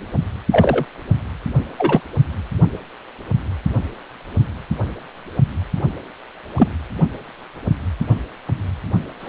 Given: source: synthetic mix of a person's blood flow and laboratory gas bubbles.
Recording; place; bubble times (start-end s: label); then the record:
Doppler ultrasound of blood flow; precordium
0.51-0.85 s: bubbles
1.78-2.01 s: bubbles
6.57-6.68 s: bubbles
9.21-9.29 s: bubbles
From the record:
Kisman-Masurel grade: 123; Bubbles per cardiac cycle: 1 to 2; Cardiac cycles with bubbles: 10 to 50%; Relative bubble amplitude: loud (0.450 to 0.775); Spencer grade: 2 (many but less than half of the cardiac periods contain bubble signals, singularly or in groups); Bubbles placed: only in the low amplitude regions of the cardiac cycle